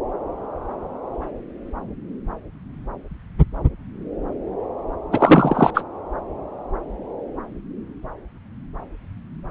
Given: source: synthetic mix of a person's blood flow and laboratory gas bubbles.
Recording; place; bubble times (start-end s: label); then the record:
Doppler ultrasound of blood flow; subclavian vein
5.11-5.70 s: bubbles
5.74-5.83 s: bubbles
From the record:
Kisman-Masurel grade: 223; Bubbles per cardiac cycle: several, 3 to 8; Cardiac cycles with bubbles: 10 to 50%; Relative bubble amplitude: loud (0.450 to 0.775); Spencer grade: 2 (many but less than half of the cardiac periods contain bubble signals, singularly or in groups); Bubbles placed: anywhere in the cardiac cycle